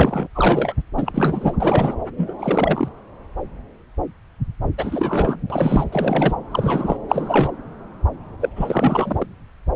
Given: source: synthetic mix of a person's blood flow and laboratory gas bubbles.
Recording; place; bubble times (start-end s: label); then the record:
Doppler ultrasound of blood flow; subclavian vein
0.00-0.28 s: bubbles
0.35-0.73 s: bubbles
0.96-1.56 s: bubbles
1.60-1.95 s: bubbles
2.18-2.34 s: bubbles
2.39-2.89 s: bubbles
4.77-5.38 s: bubbles
5.50-5.84 s: bubbles
5.92-6.33 s: bubbles
6.51-6.97 s: bubbles
7.08-7.50 s: bubbles
8.40-8.49 s: bubbles
8.56-9.26 s: bubbles
From the record:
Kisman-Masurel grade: 332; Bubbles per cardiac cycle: rolling drumbeat, 9 or more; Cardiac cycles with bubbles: 50 to 99%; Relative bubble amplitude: moderate (0.250 to 0.450); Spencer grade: 3 (all of the cardiac periods contain showers or single bubble signals, but not dominating or overriding the cardiac motion signals); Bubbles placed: anywhere in the cardiac cycle